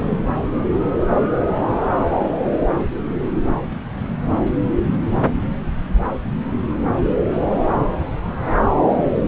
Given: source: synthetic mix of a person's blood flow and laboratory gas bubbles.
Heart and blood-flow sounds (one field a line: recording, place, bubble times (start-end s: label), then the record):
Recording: Doppler ultrasound of blood flow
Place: subclavian vein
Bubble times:
0.00-0.24 s: bubbles
From the record:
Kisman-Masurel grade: 122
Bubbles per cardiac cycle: 1 to 2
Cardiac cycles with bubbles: 10 to 50%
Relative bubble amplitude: moderate (0.250 to 0.450)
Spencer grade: 2 (many but less than half of the cardiac periods contain bubble signals, singularly or in groups)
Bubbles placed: anywhere in the cardiac cycle